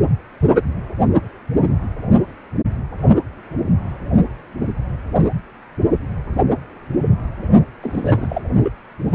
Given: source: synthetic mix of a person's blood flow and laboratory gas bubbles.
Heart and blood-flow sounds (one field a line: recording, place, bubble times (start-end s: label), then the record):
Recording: Doppler ultrasound of blood flow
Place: precordium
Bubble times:
7.82-8.42 s: bubbles
8.63-8.71 s: bubbles
From the record:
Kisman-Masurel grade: 212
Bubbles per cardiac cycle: several, 3 to 8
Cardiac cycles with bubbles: 1 to 10%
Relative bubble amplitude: moderate (0.250 to 0.450)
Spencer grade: 1 (occasional bubble signal discernible with the cardiac motion signal, with majority of cardiac periods free of bubbles)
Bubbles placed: only in the low amplitude regions of the cardiac cycle